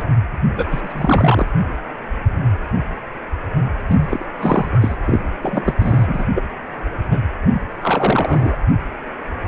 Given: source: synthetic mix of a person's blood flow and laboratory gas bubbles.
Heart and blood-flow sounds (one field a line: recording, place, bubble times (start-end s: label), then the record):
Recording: Doppler ultrasound of blood flow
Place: precordium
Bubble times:
0.00-0.04 s: bubbles
0.57-0.66 s: bubbles
0.68-1.48 s: bubbles
3.89-4.26 s: bubbles
4.38-4.97 s: bubbles
5.05-5.20 s: bubbles
5.42-5.75 s: bubbles
5.79-6.25 s: bubbles
6.35-6.43 s: bubbles
7.10-7.19 s: bubbles
7.46-7.62 s: bubbles
7.81-8.56 s: bubbles
From the record:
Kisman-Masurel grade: 232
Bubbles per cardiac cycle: several, 3 to 8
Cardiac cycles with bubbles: 50 to 99%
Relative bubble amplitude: moderate (0.250 to 0.450)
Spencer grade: 3 (all of the cardiac periods contain showers or single bubble signals, but not dominating or overriding the cardiac motion signals)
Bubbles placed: anywhere in the cardiac cycle